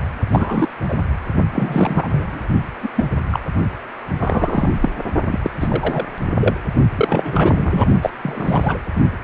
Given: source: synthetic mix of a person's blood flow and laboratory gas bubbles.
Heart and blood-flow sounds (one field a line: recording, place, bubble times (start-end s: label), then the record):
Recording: Doppler ultrasound of blood flow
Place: precordium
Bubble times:
0.32-0.68 s: bubbles
0.88-0.95 s: bubbles
1.52-2.49 s: bubbles
2.81-2.89 s: bubbles
2.96-3.05 s: bubbles
3.30-3.40 s: bubbles
4.19-4.72 s: bubbles
4.81-4.89 s: bubbles
5.26-5.50 s: bubbles
5.59-6.05 s: bubbles
6.40-6.54 s: bubbles
6.96-7.86 s: bubbles
8.02-8.11 s: bubbles
8.22-8.79 s: bubbles
From the record:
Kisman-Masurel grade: 243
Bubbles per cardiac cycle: several, 3 to 8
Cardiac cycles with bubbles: 100%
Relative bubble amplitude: loud (0.450 to 0.775)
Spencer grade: 3 (all of the cardiac periods contain showers or single bubble signals, but not dominating or overriding the cardiac motion signals)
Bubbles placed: only in the low amplitude regions of the cardiac cycle